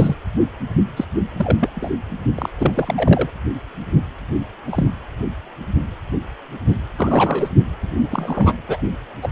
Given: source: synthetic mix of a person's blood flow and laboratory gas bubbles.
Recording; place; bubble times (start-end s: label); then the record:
Doppler ultrasound of blood flow; precordium
0.00-0.15 s: bubbles
0.96-1.04 s: bubbles
1.36-1.58 s: bubbles
1.60-1.69 s: bubbles
1.74-1.90 s: bubbles
2.35-2.50 s: bubbles
2.58-3.29 s: bubbles
4.66-4.90 s: bubbles
6.97-7.48 s: bubbles
7.82-8.53 s: bubbles
8.67-8.77 s: bubbles
9.22-9.29 s: bubbles
From the record:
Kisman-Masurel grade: 232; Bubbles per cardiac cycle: several, 3 to 8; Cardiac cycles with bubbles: 50 to 99%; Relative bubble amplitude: moderate (0.250 to 0.450); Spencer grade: 3 (all of the cardiac periods contain showers or single bubble signals, but not dominating or overriding the cardiac motion signals); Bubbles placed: anywhere in the cardiac cycle